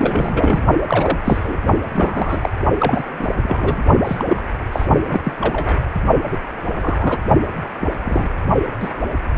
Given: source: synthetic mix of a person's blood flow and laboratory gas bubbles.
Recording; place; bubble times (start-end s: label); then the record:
Doppler ultrasound of blood flow; precordium
0.00-0.63 s: bubbles
0.88-1.19 s: bubbles
1.24-1.57 s: bubbles
1.95-2.50 s: bubbles
2.79-3.04 s: bubbles
3.19-3.28 s: bubbles
3.42-3.86 s: bubbles
4.06-4.25 s: bubbles
4.29-4.42 s: bubbles
4.72-4.86 s: bubbles
5.08-5.20 s: bubbles
5.23-5.33 s: bubbles
5.41-5.77 s: bubbles
6.31-6.38 s: bubbles
6.73-7.18 s: bubbles
7.81-7.88 s: bubbles
8.04-8.28 s: bubbles
8.79-8.89 s: bubbles
9.34-9.38 s: bubbles
From the record:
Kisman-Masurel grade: 242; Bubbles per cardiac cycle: several, 3 to 8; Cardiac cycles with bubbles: 100%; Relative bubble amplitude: moderate (0.250 to 0.450); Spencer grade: 3 (all of the cardiac periods contain showers or single bubble signals, but not dominating or overriding the cardiac motion signals); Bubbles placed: only in the low amplitude regions of the cardiac cycle